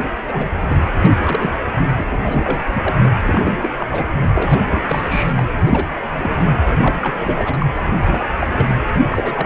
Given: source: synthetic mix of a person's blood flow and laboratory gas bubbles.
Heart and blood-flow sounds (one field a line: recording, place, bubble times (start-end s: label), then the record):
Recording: Doppler ultrasound of blood flow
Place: precordium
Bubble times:
0.27-0.48 s: bubbles
0.60-0.92 s: bubbles
1.00-1.11 s: bubbles
1.23-1.56 s: bubbles
1.75-1.89 s: bubbles
1.96-2.07 s: bubbles
2.10-2.95 s: bubbles
3.24-3.69 s: bubbles
3.77-4.04 s: bubbles
4.35-4.84 s: bubbles
4.88-5.33 s: bubbles
5.37-5.42 s: bubbles
5.66-5.89 s: bubbles
6.18-6.55 s: bubbles
6.66-6.71 s: bubbles
6.75-6.95 s: bubbles
7.01-7.66 s: bubbles
7.98-8.26 s: bubbles
8.39-8.47 s: bubbles
8.53-8.78 s: bubbles
9.08-9.46 s: bubbles
From the record:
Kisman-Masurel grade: 342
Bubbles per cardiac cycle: rolling drumbeat, 9 or more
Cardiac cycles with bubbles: 100%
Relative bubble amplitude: moderate (0.250 to 0.450)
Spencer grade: 3 (all of the cardiac periods contain showers or single bubble signals, but not dominating or overriding the cardiac motion signals)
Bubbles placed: anywhere in the cardiac cycle